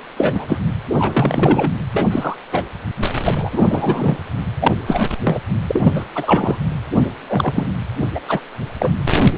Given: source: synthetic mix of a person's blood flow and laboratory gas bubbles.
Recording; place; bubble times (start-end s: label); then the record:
Doppler ultrasound of blood flow; precordium
0.17-0.59 s: bubbles
0.99-1.72 s: bubbles
1.93-2.08 s: bubbles
2.10-2.35 s: bubbles
2.52-2.64 s: bubbles
3.25-4.17 s: bubbles
4.60-4.73 s: bubbles
4.87-5.05 s: bubbles
5.23-5.38 s: bubbles
5.67-5.91 s: bubbles
5.94-6.04 s: bubbles
6.15-6.57 s: bubbles
6.97-7.09 s: bubbles
7.27-7.66 s: bubbles
8.14-8.20 s: bubbles
8.28-8.41 s: bubbles
8.79-8.90 s: bubbles
From the record:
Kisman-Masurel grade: 243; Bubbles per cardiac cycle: several, 3 to 8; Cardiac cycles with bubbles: 100%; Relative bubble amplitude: loud (0.450 to 0.775); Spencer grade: 3 (all of the cardiac periods contain showers or single bubble signals, but not dominating or overriding the cardiac motion signals); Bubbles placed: anywhere in the cardiac cycle